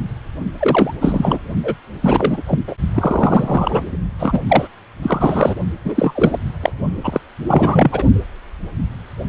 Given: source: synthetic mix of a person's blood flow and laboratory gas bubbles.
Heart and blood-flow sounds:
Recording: Doppler ultrasound of blood flow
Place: precordium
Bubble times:
0.59-0.94 s: bubbles
1.00-1.39 s: bubbles
1.64-1.74 s: bubbles
2.02-2.43 s: bubbles
2.47-2.59 s: bubbles
2.68-2.75 s: bubbles
2.95-3.84 s: bubbles
4.19-4.39 s: bubbles
4.49-4.68 s: bubbles
5.02-5.56 s: bubbles
5.84-6.38 s: bubbles
6.62-6.72 s: bubbles
7.04-7.21 s: bubbles
7.47-8.04 s: bubbles
From the record:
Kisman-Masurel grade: 333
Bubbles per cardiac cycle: rolling drumbeat, 9 or more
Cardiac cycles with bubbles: 50 to 99%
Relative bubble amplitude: loud (0.450 to 0.775)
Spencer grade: 3 (all of the cardiac periods contain showers or single bubble signals, but not dominating or overriding the cardiac motion signals)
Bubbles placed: only in the low amplitude regions of the cardiac cycle

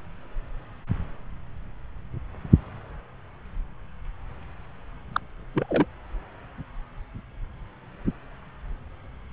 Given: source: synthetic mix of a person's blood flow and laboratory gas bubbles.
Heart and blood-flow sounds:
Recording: Doppler ultrasound of blood flow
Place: subclavian vein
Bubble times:
5.12-5.21 s: bubbles
5.54-5.86 s: bubbles
From the record:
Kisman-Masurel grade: 212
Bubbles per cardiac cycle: several, 3 to 8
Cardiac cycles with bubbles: 1 to 10%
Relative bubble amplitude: moderate (0.250 to 0.450)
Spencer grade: 1 (occasional bubble signal discernible with the cardiac motion signal, with majority of cardiac periods free of bubbles)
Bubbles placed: anywhere in the cardiac cycle

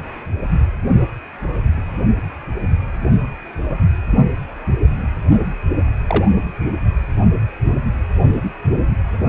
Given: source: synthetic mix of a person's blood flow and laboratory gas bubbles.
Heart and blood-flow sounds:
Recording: Doppler ultrasound of blood flow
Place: precordium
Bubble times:
6.07-6.33 s: bubbles
From the record:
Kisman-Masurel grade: 112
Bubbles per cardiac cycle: 1 to 2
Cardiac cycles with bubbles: 1 to 10%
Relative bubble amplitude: moderate (0.250 to 0.450)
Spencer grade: 1 (occasional bubble signal discernible with the cardiac motion signal, with majority of cardiac periods free of bubbles)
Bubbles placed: only in the low amplitude regions of the cardiac cycle

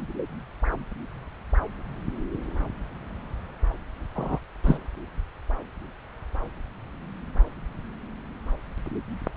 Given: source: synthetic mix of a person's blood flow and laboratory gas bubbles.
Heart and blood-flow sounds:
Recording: Doppler ultrasound of blood flow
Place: subclavian vein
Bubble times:
4.15-4.39 s: bubbles
4.63-4.78 s: bubbles
From the record:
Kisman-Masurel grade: 122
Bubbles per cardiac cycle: 1 to 2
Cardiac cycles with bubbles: 10 to 50%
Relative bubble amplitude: moderate (0.250 to 0.450)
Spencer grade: 2 (many but less than half of the cardiac periods contain bubble signals, singularly or in groups)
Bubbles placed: anywhere in the cardiac cycle

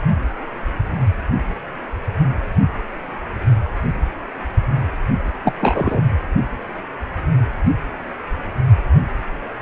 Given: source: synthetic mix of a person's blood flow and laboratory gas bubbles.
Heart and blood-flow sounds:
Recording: Doppler ultrasound of blood flow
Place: precordium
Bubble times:
5.44-5.53 s: bubbles
5.60-6.01 s: bubbles
From the record:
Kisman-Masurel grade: 213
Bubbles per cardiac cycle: several, 3 to 8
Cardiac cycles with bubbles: 1 to 10%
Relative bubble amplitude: loud (0.450 to 0.775)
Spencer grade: 1 (occasional bubble signal discernible with the cardiac motion signal, with majority of cardiac periods free of bubbles)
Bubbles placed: anywhere in the cardiac cycle

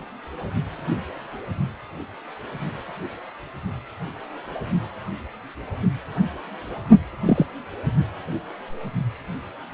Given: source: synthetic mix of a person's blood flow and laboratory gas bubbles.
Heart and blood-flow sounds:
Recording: Doppler ultrasound of blood flow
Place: precordium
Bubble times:
7.25-7.46 s: bubbles
From the record:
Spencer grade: 1 (occasional bubble signal discernible with the cardiac motion signal, with majority of cardiac periods free of bubbles)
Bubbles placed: only in the low amplitude regions of the cardiac cycle

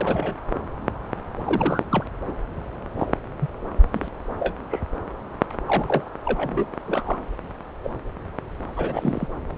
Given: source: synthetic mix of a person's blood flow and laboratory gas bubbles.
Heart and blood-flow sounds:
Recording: Doppler ultrasound of blood flow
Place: subclavian vein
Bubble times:
0.00-0.35 s: bubbles
1.45-1.83 s: bubbles
1.90-2.04 s: bubbles
2.26-2.32 s: bubbles
2.99-3.17 s: bubbles
3.40-3.48 s: bubbles
3.94-4.08 s: bubbles
4.39-4.53 s: bubbles
4.70-4.80 s: bubbles
5.67-6.10 s: bubbles
6.24-6.65 s: bubbles
6.86-7.20 s: bubbles
7.84-7.90 s: bubbles
8.76-9.28 s: bubbles
From the record:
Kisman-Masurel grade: 232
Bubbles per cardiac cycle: several, 3 to 8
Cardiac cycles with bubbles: 50 to 99%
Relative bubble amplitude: moderate (0.250 to 0.450)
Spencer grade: 3 (all of the cardiac periods contain showers or single bubble signals, but not dominating or overriding the cardiac motion signals)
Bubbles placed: anywhere in the cardiac cycle

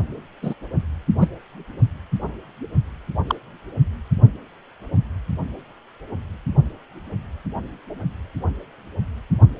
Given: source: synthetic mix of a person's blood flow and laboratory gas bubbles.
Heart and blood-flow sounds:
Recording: Doppler ultrasound of blood flow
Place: precordium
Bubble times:
0.42-0.54 s: bubbles
1.20-1.28 s: bubbles
3.27-3.35 s: bubbles
From the record:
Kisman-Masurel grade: 122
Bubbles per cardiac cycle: 1 to 2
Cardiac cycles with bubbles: 10 to 50%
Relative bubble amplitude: moderate (0.250 to 0.450)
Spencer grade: 2 (many but less than half of the cardiac periods contain bubble signals, singularly or in groups)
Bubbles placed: only in the low amplitude regions of the cardiac cycle

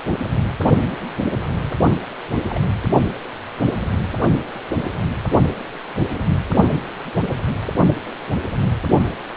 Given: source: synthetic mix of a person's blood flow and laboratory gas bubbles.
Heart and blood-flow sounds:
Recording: Doppler ultrasound of blood flow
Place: precordium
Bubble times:
2.49-2.60 s: bubbles
From the record:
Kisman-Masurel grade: 121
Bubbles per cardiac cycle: 1 to 2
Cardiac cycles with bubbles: 10 to 50%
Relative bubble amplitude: barely perceptible (0.100 to 0.250)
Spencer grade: 2 (many but less than half of the cardiac periods contain bubble signals, singularly or in groups)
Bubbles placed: only in the low amplitude regions of the cardiac cycle

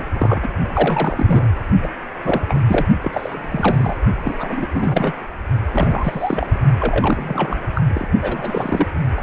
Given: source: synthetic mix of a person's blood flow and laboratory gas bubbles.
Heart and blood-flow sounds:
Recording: Doppler ultrasound of blood flow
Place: precordium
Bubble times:
0.00-0.02 s: bubbles
0.13-0.48 s: bubbles
0.72-1.48 s: bubbles
1.82-1.88 s: bubbles
2.24-2.63 s: bubbles
2.67-2.86 s: bubbles
3.01-3.97 s: bubbles
4.25-4.66 s: bubbles
4.72-5.12 s: bubbles
5.71-6.58 s: bubbles
6.79-7.57 s: bubbles
7.75-7.82 s: bubbles
7.87-8.09 s: bubbles
8.21-8.88 s: bubbles
9.17-9.21 s: bubbles
From the record:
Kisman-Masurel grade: 342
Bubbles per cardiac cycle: rolling drumbeat, 9 or more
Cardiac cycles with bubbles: 100%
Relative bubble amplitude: moderate (0.250 to 0.450)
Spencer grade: 3 (all of the cardiac periods contain showers or single bubble signals, but not dominating or overriding the cardiac motion signals)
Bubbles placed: only in the low amplitude regions of the cardiac cycle

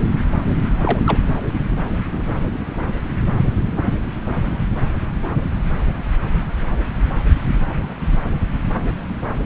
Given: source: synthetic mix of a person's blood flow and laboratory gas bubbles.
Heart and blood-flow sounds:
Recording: Doppler ultrasound of blood flow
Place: subclavian vein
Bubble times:
0.81-0.99 s: bubbles
1.06-1.18 s: bubbles
From the record:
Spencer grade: 1 (occasional bubble signal discernible with the cardiac motion signal, with majority of cardiac periods free of bubbles)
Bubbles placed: anywhere in the cardiac cycle

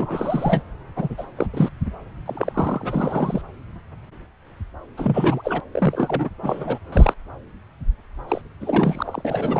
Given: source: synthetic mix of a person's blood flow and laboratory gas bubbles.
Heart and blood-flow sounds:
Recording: Doppler ultrasound of blood flow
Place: subclavian vein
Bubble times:
0.00-0.62 s: bubbles
0.95-1.25 s: bubbles
1.36-1.46 s: bubbles
1.54-1.69 s: bubbles
2.25-3.42 s: bubbles
4.97-5.61 s: bubbles
5.72-6.30 s: bubbles
6.43-6.79 s: bubbles
6.92-7.14 s: bubbles
8.28-8.41 s: bubbles
8.60-9.22 s: bubbles
9.24-9.59 s: bubbles
From the record:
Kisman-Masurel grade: 332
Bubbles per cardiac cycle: rolling drumbeat, 9 or more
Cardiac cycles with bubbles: 50 to 99%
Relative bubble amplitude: moderate (0.250 to 0.450)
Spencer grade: 3 (all of the cardiac periods contain showers or single bubble signals, but not dominating or overriding the cardiac motion signals)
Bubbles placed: anywhere in the cardiac cycle

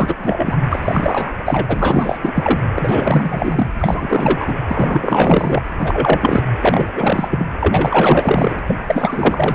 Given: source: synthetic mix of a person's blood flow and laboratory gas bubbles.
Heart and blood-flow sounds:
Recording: Doppler ultrasound of blood flow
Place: precordium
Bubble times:
0.00-0.15 s: bubbles
0.20-0.57 s: bubbles
0.70-1.33 s: bubbles
1.45-2.60 s: bubbles
2.75-3.67 s: bubbles
3.79-4.54 s: bubbles
4.67-5.62 s: bubbles
5.78-6.42 s: bubbles
6.61-6.88 s: bubbles
6.96-7.46 s: bubbles
7.59-8.59 s: bubbles
8.67-8.76 s: bubbles
8.86-9.55 s: bubbles
From the record:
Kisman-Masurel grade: 444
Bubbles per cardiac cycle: continuous sound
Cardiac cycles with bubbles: 100%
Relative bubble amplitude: maximal (0.775 to 0.999)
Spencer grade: 4 (maximum detectable bubble signal sounding continuously throughout systole and diastole of every cardiac period, and overriding the amplitude of the normal cardiac signals)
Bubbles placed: anywhere in the cardiac cycle

